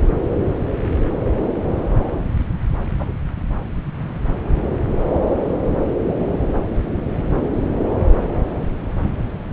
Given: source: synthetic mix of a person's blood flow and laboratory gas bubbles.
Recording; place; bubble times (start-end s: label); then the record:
Doppler ultrasound of blood flow; subclavian vein
2.99-3.13 s: bubbles
From the record:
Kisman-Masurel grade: 112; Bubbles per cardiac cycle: 1 to 2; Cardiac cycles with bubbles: 1 to 10%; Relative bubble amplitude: moderate (0.250 to 0.450); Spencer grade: 1 (occasional bubble signal discernible with the cardiac motion signal, with majority of cardiac periods free of bubbles); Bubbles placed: anywhere in the cardiac cycle